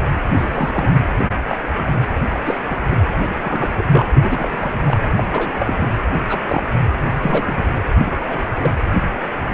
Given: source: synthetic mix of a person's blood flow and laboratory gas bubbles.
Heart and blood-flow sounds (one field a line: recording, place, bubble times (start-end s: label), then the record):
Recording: Doppler ultrasound of blood flow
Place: precordium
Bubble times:
0.37-0.88 s: bubbles
1.18-1.23 s: bubbles
1.47-1.57 s: bubbles
1.76-1.93 s: bubbles
2.46-2.58 s: bubbles
2.71-2.78 s: bubbles
2.91-2.97 s: bubbles
3.21-3.85 s: bubbles
3.93-4.05 s: bubbles
4.14-4.72 s: bubbles
4.86-5.00 s: bubbles
5.17-5.23 s: bubbles
5.32-5.88 s: bubbles
6.29-6.77 s: bubbles
7.21-7.83 s: bubbles
7.98-8.13 s: bubbles
8.26-8.45 s: bubbles
8.55-8.71 s: bubbles
From the record:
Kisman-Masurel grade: 232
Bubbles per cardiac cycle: several, 3 to 8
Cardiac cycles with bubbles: 50 to 99%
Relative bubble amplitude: moderate (0.250 to 0.450)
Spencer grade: 3 (all of the cardiac periods contain showers or single bubble signals, but not dominating or overriding the cardiac motion signals)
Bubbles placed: anywhere in the cardiac cycle